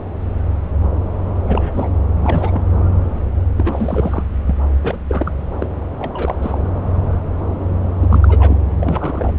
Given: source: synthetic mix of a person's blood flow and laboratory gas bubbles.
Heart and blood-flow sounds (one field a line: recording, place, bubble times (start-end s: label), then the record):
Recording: Doppler ultrasound of blood flow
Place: subclavian vein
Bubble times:
1.43-1.89 s: bubbles
2.19-2.62 s: bubbles
3.56-4.23 s: bubbles
4.46-4.55 s: bubbles
4.81-4.96 s: bubbles
5.08-5.32 s: bubbles
5.60-5.67 s: bubbles
5.99-6.35 s: bubbles
6.41-6.58 s: bubbles
8.00-8.57 s: bubbles
8.80-9.33 s: bubbles
From the record:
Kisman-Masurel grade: 332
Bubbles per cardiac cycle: rolling drumbeat, 9 or more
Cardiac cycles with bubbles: 50 to 99%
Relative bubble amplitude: moderate (0.250 to 0.450)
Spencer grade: 3 (all of the cardiac periods contain showers or single bubble signals, but not dominating or overriding the cardiac motion signals)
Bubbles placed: anywhere in the cardiac cycle